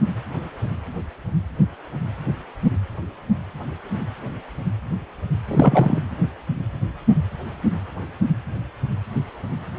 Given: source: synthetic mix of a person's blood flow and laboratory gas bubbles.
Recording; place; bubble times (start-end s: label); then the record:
Doppler ultrasound of blood flow; precordium
5.47-6.00 s: bubbles
From the record:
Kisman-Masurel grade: 213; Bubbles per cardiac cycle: several, 3 to 8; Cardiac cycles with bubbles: 1 to 10%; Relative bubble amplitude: loud (0.450 to 0.775); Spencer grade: 1 (occasional bubble signal discernible with the cardiac motion signal, with majority of cardiac periods free of bubbles); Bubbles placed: anywhere in the cardiac cycle